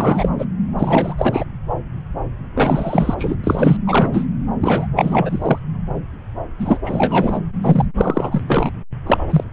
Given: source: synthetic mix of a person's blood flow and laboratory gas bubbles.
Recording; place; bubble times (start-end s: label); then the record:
Doppler ultrasound of blood flow; subclavian vein
0.00-0.29 s: bubbles
0.38-0.46 s: bubbles
0.79-1.44 s: bubbles
2.54-3.15 s: bubbles
3.18-3.36 s: bubbles
3.44-3.77 s: bubbles
3.87-4.26 s: bubbles
4.61-4.87 s: bubbles
4.96-5.59 s: bubbles
6.58-6.80 s: bubbles
6.83-7.41 s: bubbles
7.62-7.85 s: bubbles
7.97-8.42 s: bubbles
8.47-8.71 s: bubbles
9.06-9.18 s: bubbles
9.30-9.44 s: bubbles
From the record:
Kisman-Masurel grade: 333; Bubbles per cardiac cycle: rolling drumbeat, 9 or more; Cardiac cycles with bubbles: 50 to 99%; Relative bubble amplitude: loud (0.450 to 0.775); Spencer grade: 3 (all of the cardiac periods contain showers or single bubble signals, but not dominating or overriding the cardiac motion signals); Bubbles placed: anywhere in the cardiac cycle